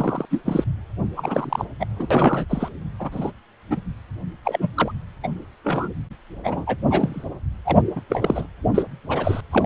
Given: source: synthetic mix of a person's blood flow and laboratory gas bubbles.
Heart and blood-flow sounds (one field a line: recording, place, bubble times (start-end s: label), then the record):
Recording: Doppler ultrasound of blood flow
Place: precordium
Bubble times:
0.00-0.26 s: bubbles
0.31-0.42 s: bubbles
0.46-0.65 s: bubbles
1.16-1.65 s: bubbles
1.79-1.85 s: bubbles
1.99-2.08 s: bubbles
2.10-2.46 s: bubbles
2.50-2.69 s: bubbles
2.99-3.31 s: bubbles
3.70-3.81 s: bubbles
4.45-4.73 s: bubbles
4.76-4.92 s: bubbles
5.23-5.28 s: bubbles
5.64-5.91 s: bubbles
6.44-6.77 s: bubbles
6.90-7.24 s: bubbles
7.65-7.79 s: bubbles
7.96-8.02 s: bubbles
8.09-8.46 s: bubbles
8.74-8.83 s: bubbles
9.08-9.41 s: bubbles
9.51-9.66 s: bubbles
From the record:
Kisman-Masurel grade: 242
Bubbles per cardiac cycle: several, 3 to 8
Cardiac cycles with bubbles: 100%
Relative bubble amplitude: moderate (0.250 to 0.450)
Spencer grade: 3 (all of the cardiac periods contain showers or single bubble signals, but not dominating or overriding the cardiac motion signals)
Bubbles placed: anywhere in the cardiac cycle